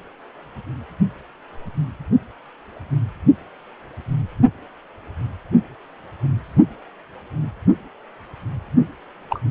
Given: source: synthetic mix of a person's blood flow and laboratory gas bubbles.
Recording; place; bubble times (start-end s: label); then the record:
Doppler ultrasound of blood flow; precordium
9.29-9.40 s: bubbles
From the record:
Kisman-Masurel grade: 112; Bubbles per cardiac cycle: 1 to 2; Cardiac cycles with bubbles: 1 to 10%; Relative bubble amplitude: moderate (0.250 to 0.450); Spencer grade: 1 (occasional bubble signal discernible with the cardiac motion signal, with majority of cardiac periods free of bubbles); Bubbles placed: anywhere in the cardiac cycle